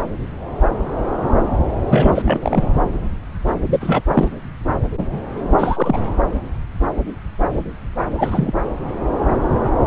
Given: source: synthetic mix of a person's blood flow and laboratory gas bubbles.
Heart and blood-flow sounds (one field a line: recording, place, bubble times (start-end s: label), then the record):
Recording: Doppler ultrasound of blood flow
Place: subclavian vein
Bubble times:
1.90-2.40 s: bubbles
2.42-2.68 s: bubbles
3.67-4.03 s: bubbles
4.12-4.28 s: bubbles
5.58-6.00 s: bubbles
8.18-8.52 s: bubbles
From the record:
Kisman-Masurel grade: 223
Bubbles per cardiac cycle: several, 3 to 8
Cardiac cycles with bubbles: 10 to 50%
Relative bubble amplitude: loud (0.450 to 0.775)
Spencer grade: 2 (many but less than half of the cardiac periods contain bubble signals, singularly or in groups)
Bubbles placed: anywhere in the cardiac cycle